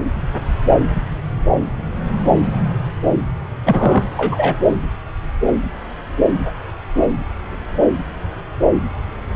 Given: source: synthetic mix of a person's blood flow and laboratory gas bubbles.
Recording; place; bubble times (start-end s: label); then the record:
Doppler ultrasound of blood flow; subclavian vein
3.66-4.04 s: bubbles
4.17-4.56 s: bubbles
From the record:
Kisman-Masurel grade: 213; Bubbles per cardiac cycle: several, 3 to 8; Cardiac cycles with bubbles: 1 to 10%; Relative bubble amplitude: loud (0.450 to 0.775); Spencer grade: 1 (occasional bubble signal discernible with the cardiac motion signal, with majority of cardiac periods free of bubbles); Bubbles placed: anywhere in the cardiac cycle